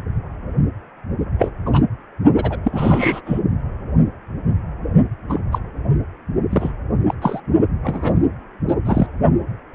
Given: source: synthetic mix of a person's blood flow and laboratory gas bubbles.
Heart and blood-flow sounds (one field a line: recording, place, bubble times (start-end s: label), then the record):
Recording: Doppler ultrasound of blood flow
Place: precordium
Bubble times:
1.39-1.50 s: bubbles
1.66-1.82 s: bubbles
2.35-2.57 s: bubbles
2.63-3.39 s: bubbles
5.29-5.41 s: bubbles
5.52-5.58 s: bubbles
6.51-6.74 s: bubbles
7.08-7.15 s: bubbles
7.22-7.40 s: bubbles
7.83-8.26 s: bubbles
8.68-8.74 s: bubbles
8.85-9.08 s: bubbles
From the record:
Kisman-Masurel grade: 232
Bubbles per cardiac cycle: several, 3 to 8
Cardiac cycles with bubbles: 50 to 99%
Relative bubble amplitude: moderate (0.250 to 0.450)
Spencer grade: 3 (all of the cardiac periods contain showers or single bubble signals, but not dominating or overriding the cardiac motion signals)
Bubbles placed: only in the low amplitude regions of the cardiac cycle